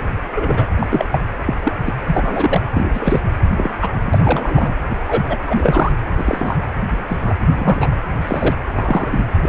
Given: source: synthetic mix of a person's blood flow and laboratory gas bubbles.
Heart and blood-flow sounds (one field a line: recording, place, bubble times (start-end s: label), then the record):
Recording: Doppler ultrasound of blood flow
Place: precordium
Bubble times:
0.00-0.04 s: bubbles
0.34-0.65 s: bubbles
0.79-0.86 s: bubbles
0.89-1.05 s: bubbles
1.10-1.19 s: bubbles
1.45-1.54 s: bubbles
1.64-1.73 s: bubbles
1.85-1.94 s: bubbles
2.06-2.61 s: bubbles
2.73-3.21 s: bubbles
3.56-3.70 s: bubbles
3.81-3.89 s: bubbles
4.04-4.19 s: bubbles
4.23-4.74 s: bubbles
4.89-4.99 s: bubbles
5.06-5.38 s: bubbles
5.47-5.92 s: bubbles
6.16-6.59 s: bubbles
6.86-7.17 s: bubbles
7.20-7.35 s: bubbles
7.56-7.88 s: bubbles
8.21-8.54 s: bubbles
8.75-9.08 s: bubbles
9.11-9.26 s: bubbles
9.42-9.49 s: bubbles
From the record:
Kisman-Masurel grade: 243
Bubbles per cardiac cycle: several, 3 to 8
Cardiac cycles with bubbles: 100%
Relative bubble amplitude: loud (0.450 to 0.775)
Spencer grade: 3 (all of the cardiac periods contain showers or single bubble signals, but not dominating or overriding the cardiac motion signals)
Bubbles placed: anywhere in the cardiac cycle